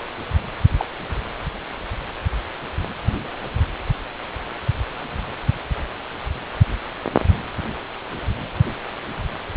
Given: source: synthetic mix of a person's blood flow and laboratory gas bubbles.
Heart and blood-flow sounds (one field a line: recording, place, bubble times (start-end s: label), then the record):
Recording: Doppler ultrasound of blood flow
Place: precordium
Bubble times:
0.77-0.85 s: bubbles
From the record:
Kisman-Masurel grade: 112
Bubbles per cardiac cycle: 1 to 2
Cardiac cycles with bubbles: 1 to 10%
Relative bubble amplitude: moderate (0.250 to 0.450)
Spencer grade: 1 (occasional bubble signal discernible with the cardiac motion signal, with majority of cardiac periods free of bubbles)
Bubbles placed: anywhere in the cardiac cycle